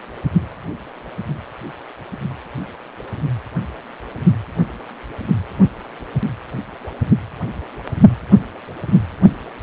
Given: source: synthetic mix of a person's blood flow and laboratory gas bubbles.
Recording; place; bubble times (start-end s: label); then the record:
Doppler ultrasound of blood flow; precordium
no bubbles
From the record:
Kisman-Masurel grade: 000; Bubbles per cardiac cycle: 0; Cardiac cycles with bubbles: 0%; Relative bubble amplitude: no bubbles discernible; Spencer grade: 0 (complete lack of bubble signals)